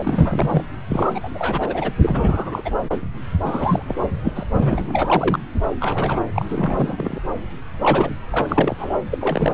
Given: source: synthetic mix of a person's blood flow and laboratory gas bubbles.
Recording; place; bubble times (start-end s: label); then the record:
Doppler ultrasound of blood flow; subclavian vein
0.00-0.64 s: bubbles
0.89-1.20 s: bubbles
1.23-1.29 s: bubbles
1.34-1.92 s: bubbles
2.03-2.62 s: bubbles
2.65-2.71 s: bubbles
3.43-3.96 s: bubbles
4.24-4.32 s: bubbles
4.35-4.43 s: bubbles
4.59-5.39 s: bubbles
5.80-6.21 s: bubbles
6.34-6.45 s: bubbles
6.49-7.19 s: bubbles
7.81-8.16 s: bubbles
8.30-8.97 s: bubbles
9.11-9.18 s: bubbles
9.21-9.54 s: bubbles
From the record:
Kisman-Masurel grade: 332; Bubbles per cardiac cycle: rolling drumbeat, 9 or more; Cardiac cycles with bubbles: 50 to 99%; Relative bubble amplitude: moderate (0.250 to 0.450); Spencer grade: 3 (all of the cardiac periods contain showers or single bubble signals, but not dominating or overriding the cardiac motion signals); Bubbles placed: anywhere in the cardiac cycle